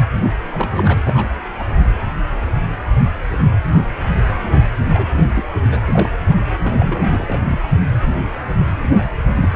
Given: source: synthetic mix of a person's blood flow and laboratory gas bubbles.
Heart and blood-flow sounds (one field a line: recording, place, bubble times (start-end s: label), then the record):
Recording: Doppler ultrasound of blood flow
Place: precordium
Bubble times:
0.53-0.98 s: bubbles
1.04-1.30 s: bubbles
1.58-1.67 s: bubbles
4.93-5.22 s: bubbles
5.35-5.43 s: bubbles
5.71-5.81 s: bubbles
5.86-6.09 s: bubbles
6.58-7.43 s: bubbles
7.48-7.60 s: bubbles
9.28-9.38 s: bubbles
9.41-9.48 s: bubbles
9.51-9.56 s: bubbles
From the record:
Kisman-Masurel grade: 332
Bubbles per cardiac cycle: rolling drumbeat, 9 or more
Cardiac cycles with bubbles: 50 to 99%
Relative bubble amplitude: moderate (0.250 to 0.450)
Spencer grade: 3 (all of the cardiac periods contain showers or single bubble signals, but not dominating or overriding the cardiac motion signals)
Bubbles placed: only in the low amplitude regions of the cardiac cycle